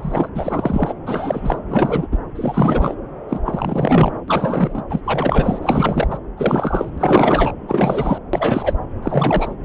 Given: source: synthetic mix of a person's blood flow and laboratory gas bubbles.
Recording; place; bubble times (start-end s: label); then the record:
Doppler ultrasound of blood flow; subclavian vein
0.00-0.29 s: bubbles
0.34-0.94 s: bubbles
1.06-1.59 s: bubbles
1.69-2.07 s: bubbles
2.11-2.17 s: bubbles
2.35-2.94 s: bubbles
3.28-3.40 s: bubbles
3.45-4.12 s: bubbles
4.28-4.83 s: bubbles
4.90-5.01 s: bubbles
5.04-5.58 s: bubbles
5.62-6.08 s: bubbles
6.10-6.17 s: bubbles
6.38-6.90 s: bubbles
6.98-7.53 s: bubbles
7.67-8.18 s: bubbles
8.33-8.73 s: bubbles
9.02-9.55 s: bubbles
From the record:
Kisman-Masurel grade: 343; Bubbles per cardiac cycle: rolling drumbeat, 9 or more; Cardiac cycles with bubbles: 100%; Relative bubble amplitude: loud (0.450 to 0.775); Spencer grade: 3 (all of the cardiac periods contain showers or single bubble signals, but not dominating or overriding the cardiac motion signals); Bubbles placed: anywhere in the cardiac cycle